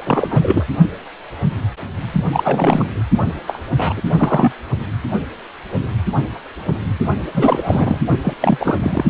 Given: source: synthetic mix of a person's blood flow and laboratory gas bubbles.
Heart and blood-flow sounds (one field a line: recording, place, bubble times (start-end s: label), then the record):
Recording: Doppler ultrasound of blood flow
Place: precordium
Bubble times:
0.00-0.65 s: bubbles
2.12-2.25 s: bubbles
2.32-3.03 s: bubbles
3.46-3.61 s: bubbles
3.77-4.01 s: bubbles
4.18-4.52 s: bubbles
7.20-8.00 s: bubbles
8.24-8.34 s: bubbles
8.40-9.06 s: bubbles
From the record:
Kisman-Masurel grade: 333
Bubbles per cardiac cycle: rolling drumbeat, 9 or more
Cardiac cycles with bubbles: 50 to 99%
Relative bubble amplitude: loud (0.450 to 0.775)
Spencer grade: 3 (all of the cardiac periods contain showers or single bubble signals, but not dominating or overriding the cardiac motion signals)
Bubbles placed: only in the low amplitude regions of the cardiac cycle